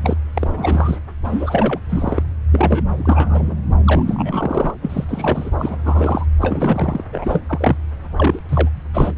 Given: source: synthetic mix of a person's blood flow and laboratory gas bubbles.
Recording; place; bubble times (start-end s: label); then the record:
Doppler ultrasound of blood flow; subclavian vein
0.02-0.17 s: bubbles
0.34-1.00 s: bubbles
1.24-1.80 s: bubbles
1.89-2.23 s: bubbles
2.49-2.84 s: bubbles
2.89-3.56 s: bubbles
3.84-4.04 s: bubbles
4.07-4.75 s: bubbles
4.82-5.04 s: bubbles
5.08-5.50 s: bubbles
5.58-5.76 s: bubbles
5.84-6.26 s: bubbles
6.41-7.04 s: bubbles
7.12-7.41 s: bubbles
7.49-7.76 s: bubbles
8.16-8.39 s: bubbles
8.48-8.69 s: bubbles
8.93-9.12 s: bubbles
From the record:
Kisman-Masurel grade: 342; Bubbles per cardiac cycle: rolling drumbeat, 9 or more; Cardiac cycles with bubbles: 100%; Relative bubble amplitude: moderate (0.250 to 0.450); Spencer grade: 3 (all of the cardiac periods contain showers or single bubble signals, but not dominating or overriding the cardiac motion signals); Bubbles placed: anywhere in the cardiac cycle